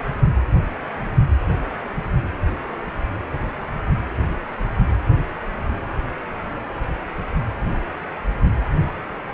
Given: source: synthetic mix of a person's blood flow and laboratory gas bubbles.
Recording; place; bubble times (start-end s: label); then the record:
Doppler ultrasound of blood flow; precordium
no bubbles
From the record:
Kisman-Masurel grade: 000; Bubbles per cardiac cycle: 0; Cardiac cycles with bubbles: 0%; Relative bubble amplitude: no bubbles discernible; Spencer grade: 0 (complete lack of bubble signals)